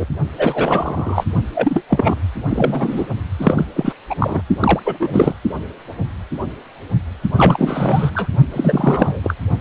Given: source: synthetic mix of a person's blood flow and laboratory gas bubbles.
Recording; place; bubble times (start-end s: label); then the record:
Doppler ultrasound of blood flow; precordium
0.00-0.05 s: bubbles
0.38-1.24 s: bubbles
1.54-1.82 s: bubbles
1.90-2.15 s: bubbles
2.46-3.07 s: bubbles
3.39-3.65 s: bubbles
3.75-3.93 s: bubbles
4.10-4.15 s: bubbles
4.20-4.42 s: bubbles
4.60-4.80 s: bubbles
4.84-4.97 s: bubbles
5.00-5.34 s: bubbles
7.33-8.11 s: bubbles
8.15-8.29 s: bubbles
8.54-9.21 s: bubbles
9.23-9.35 s: bubbles
From the record:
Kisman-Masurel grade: 333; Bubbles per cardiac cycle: rolling drumbeat, 9 or more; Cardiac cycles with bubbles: 50 to 99%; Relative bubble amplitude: loud (0.450 to 0.775); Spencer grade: 3 (all of the cardiac periods contain showers or single bubble signals, but not dominating or overriding the cardiac motion signals); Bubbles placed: only in the low amplitude regions of the cardiac cycle